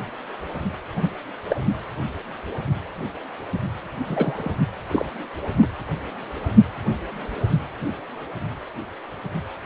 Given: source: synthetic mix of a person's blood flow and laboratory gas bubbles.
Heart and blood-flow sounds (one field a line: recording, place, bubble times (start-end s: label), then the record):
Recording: Doppler ultrasound of blood flow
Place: precordium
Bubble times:
0.96-1.09 s: bubbles
1.49-1.56 s: bubbles
4.06-4.58 s: bubbles
4.88-5.04 s: bubbles
5.61-5.67 s: bubbles
From the record:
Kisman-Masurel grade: 122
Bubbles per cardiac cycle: 1 to 2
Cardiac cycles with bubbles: 10 to 50%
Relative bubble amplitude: moderate (0.250 to 0.450)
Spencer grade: 2 (many but less than half of the cardiac periods contain bubble signals, singularly or in groups)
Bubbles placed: anywhere in the cardiac cycle